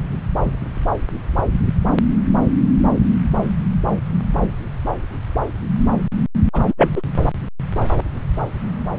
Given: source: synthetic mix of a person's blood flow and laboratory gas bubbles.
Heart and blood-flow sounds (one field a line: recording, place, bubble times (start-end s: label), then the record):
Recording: Doppler ultrasound of blood flow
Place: subclavian vein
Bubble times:
6.53-6.61 s: bubbles
6.68-6.74 s: bubbles
6.78-7.02 s: bubbles
From the record:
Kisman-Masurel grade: 213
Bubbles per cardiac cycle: several, 3 to 8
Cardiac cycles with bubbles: 1 to 10%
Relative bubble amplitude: loud (0.450 to 0.775)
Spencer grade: 1 (occasional bubble signal discernible with the cardiac motion signal, with majority of cardiac periods free of bubbles)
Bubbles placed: anywhere in the cardiac cycle